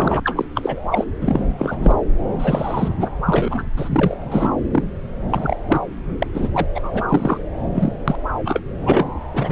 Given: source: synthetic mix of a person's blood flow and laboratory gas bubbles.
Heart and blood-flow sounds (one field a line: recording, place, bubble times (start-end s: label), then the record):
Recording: Doppler ultrasound of blood flow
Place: subclavian vein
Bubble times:
0.00-0.20 s: bubbles
0.24-0.45 s: bubbles
0.54-0.77 s: bubbles
0.91-1.04 s: bubbles
1.21-1.49 s: bubbles
1.58-1.77 s: bubbles
1.82-1.95 s: bubbles
2.38-3.10 s: bubbles
3.25-3.64 s: bubbles
3.77-4.17 s: bubbles
4.25-4.52 s: bubbles
4.73-4.83 s: bubbles
5.30-5.58 s: bubbles
5.69-5.81 s: bubbles
6.19-6.27 s: bubbles
6.34-6.50 s: bubbles
6.54-6.65 s: bubbles
6.75-7.03 s: bubbles
7.09-7.38 s: bubbles
7.75-7.93 s: bubbles
8.07-8.15 s: bubbles
8.44-8.60 s: bubbles
8.85-9.05 s: bubbles
9.32-9.52 s: bubbles
From the record:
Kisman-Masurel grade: 343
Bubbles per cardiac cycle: rolling drumbeat, 9 or more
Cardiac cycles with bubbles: 100%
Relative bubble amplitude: loud (0.450 to 0.775)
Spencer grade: 3 (all of the cardiac periods contain showers or single bubble signals, but not dominating or overriding the cardiac motion signals)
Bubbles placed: anywhere in the cardiac cycle